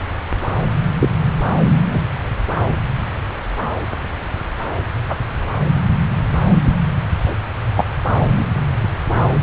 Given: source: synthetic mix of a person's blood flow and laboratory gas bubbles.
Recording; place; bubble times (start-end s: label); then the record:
Doppler ultrasound of blood flow; subclavian vein
0.99-1.08 s: bubbles
1.86-1.99 s: bubbles
5.08-5.17 s: bubbles
6.64-6.74 s: bubbles
7.76-7.84 s: bubbles
8.21-8.48 s: bubbles
From the record:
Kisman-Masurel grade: 123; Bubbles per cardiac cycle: 1 to 2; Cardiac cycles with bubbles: 10 to 50%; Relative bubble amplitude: loud (0.450 to 0.775); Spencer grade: 2 (many but less than half of the cardiac periods contain bubble signals, singularly or in groups); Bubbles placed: anywhere in the cardiac cycle